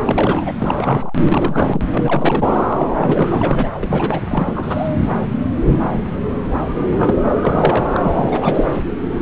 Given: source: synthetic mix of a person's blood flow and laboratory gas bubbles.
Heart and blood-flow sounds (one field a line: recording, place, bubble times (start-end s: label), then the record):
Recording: Doppler ultrasound of blood flow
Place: subclavian vein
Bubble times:
0.05-0.52 s: bubbles
0.58-1.16 s: bubbles
1.24-1.84 s: bubbles
1.90-2.47 s: bubbles
2.78-2.90 s: bubbles
2.97-3.70 s: bubbles
3.82-4.21 s: bubbles
4.28-4.88 s: bubbles
6.98-7.17 s: bubbles
7.41-7.87 s: bubbles
7.95-8.00 s: bubbles
8.04-8.82 s: bubbles
From the record:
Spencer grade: 3 (all of the cardiac periods contain showers or single bubble signals, but not dominating or overriding the cardiac motion signals)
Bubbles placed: anywhere in the cardiac cycle